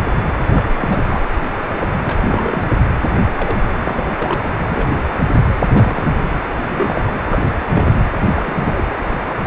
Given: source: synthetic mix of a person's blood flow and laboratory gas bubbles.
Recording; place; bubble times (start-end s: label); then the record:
Doppler ultrasound of blood flow; precordium
0.54-0.68 s: bubbles
0.78-1.03 s: bubbles
1.06-1.23 s: bubbles
1.67-2.01 s: bubbles
2.05-2.16 s: bubbles
2.20-2.65 s: bubbles
3.37-3.61 s: bubbles
3.77-4.12 s: bubbles
4.15-4.35 s: bubbles
4.39-4.66 s: bubbles
4.69-5.02 s: bubbles
5.71-6.16 s: bubbles
6.67-7.02 s: bubbles
7.09-7.21 s: bubbles
7.28-7.65 s: bubbles
7.69-7.96 s: bubbles
8.22-8.42 s: bubbles
8.45-8.84 s: bubbles
From the record:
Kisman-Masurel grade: 232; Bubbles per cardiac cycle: several, 3 to 8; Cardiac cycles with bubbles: 50 to 99%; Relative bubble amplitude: moderate (0.250 to 0.450); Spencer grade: 3 (all of the cardiac periods contain showers or single bubble signals, but not dominating or overriding the cardiac motion signals); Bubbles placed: anywhere in the cardiac cycle